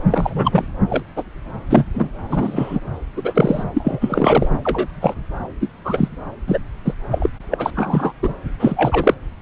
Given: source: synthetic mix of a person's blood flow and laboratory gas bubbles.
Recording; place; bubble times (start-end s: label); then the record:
Doppler ultrasound of blood flow; subclavian vein
0.11-0.67 s: bubbles
0.89-1.03 s: bubbles
1.16-1.23 s: bubbles
1.69-1.84 s: bubbles
1.94-2.08 s: bubbles
2.29-2.81 s: bubbles
3.16-3.63 s: bubbles
3.73-4.48 s: bubbles
4.63-4.88 s: bubbles
5.01-5.14 s: bubbles
5.60-5.68 s: bubbles
5.84-6.08 s: bubbles
6.46-6.58 s: bubbles
6.84-6.94 s: bubbles
7.11-7.29 s: bubbles
7.50-7.71 s: bubbles
7.75-8.12 s: bubbles
8.23-8.34 s: bubbles
8.60-9.14 s: bubbles
From the record:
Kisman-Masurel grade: 243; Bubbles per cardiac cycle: several, 3 to 8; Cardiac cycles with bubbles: 100%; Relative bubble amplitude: loud (0.450 to 0.775); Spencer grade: 3 (all of the cardiac periods contain showers or single bubble signals, but not dominating or overriding the cardiac motion signals); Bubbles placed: anywhere in the cardiac cycle